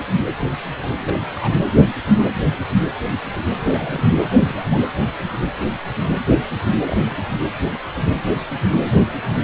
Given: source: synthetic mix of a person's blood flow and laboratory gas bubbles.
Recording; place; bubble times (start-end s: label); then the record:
Doppler ultrasound of blood flow; precordium
0.11-0.23 s: bubbles
1.00-1.19 s: bubbles
1.32-1.56 s: bubbles
3.56-4.04 s: bubbles
4.21-4.30 s: bubbles
4.46-4.82 s: bubbles
6.81-7.38 s: bubbles
From the record:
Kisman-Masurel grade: 221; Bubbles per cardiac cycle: several, 3 to 8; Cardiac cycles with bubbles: 10 to 50%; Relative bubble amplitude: barely perceptible (0.100 to 0.250); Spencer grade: 2 (many but less than half of the cardiac periods contain bubble signals, singularly or in groups); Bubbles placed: anywhere in the cardiac cycle